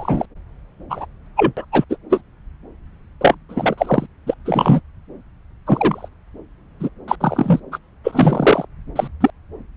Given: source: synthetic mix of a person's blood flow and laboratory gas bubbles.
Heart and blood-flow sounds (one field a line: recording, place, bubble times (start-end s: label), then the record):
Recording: Doppler ultrasound of blood flow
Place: subclavian vein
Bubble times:
0.00-0.26 s: bubbles
0.89-1.06 s: bubbles
1.36-1.52 s: bubbles
1.56-1.65 s: bubbles
1.72-1.85 s: bubbles
1.90-1.97 s: bubbles
2.09-2.21 s: bubbles
3.21-3.34 s: bubbles
3.48-3.75 s: bubbles
3.77-4.06 s: bubbles
4.27-4.34 s: bubbles
4.45-4.81 s: bubbles
5.67-6.08 s: bubbles
6.79-6.90 s: bubbles
7.08-7.16 s: bubbles
7.20-7.60 s: bubbles
7.72-7.78 s: bubbles
8.04-8.65 s: bubbles
8.96-9.07 s: bubbles
9.21-9.30 s: bubbles
From the record:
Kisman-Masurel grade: 243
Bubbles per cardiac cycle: several, 3 to 8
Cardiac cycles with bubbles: 100%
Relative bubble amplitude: loud (0.450 to 0.775)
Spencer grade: 3 (all of the cardiac periods contain showers or single bubble signals, but not dominating or overriding the cardiac motion signals)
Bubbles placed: anywhere in the cardiac cycle